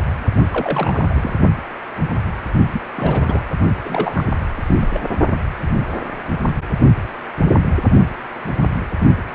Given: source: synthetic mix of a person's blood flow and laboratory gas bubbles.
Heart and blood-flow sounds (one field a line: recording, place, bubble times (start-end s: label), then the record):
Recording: Doppler ultrasound of blood flow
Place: precordium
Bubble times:
0.50-1.07 s: bubbles
1.09-1.34 s: bubbles
2.72-2.81 s: bubbles
2.96-3.42 s: bubbles
3.84-4.26 s: bubbles
4.55-4.75 s: bubbles
4.80-4.88 s: bubbles
4.93-5.02 s: bubbles
From the record:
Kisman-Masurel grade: 232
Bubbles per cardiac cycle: several, 3 to 8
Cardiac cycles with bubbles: 50 to 99%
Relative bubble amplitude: moderate (0.250 to 0.450)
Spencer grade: 3 (all of the cardiac periods contain showers or single bubble signals, but not dominating or overriding the cardiac motion signals)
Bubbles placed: only in the low amplitude regions of the cardiac cycle